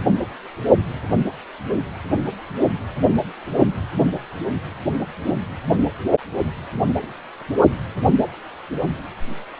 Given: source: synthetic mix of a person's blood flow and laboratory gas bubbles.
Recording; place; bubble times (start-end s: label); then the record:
Doppler ultrasound of blood flow; precordium
no bubbles
From the record:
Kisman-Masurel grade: 000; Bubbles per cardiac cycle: 0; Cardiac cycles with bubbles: 0%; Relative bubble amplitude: no bubbles discernible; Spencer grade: 0 (complete lack of bubble signals)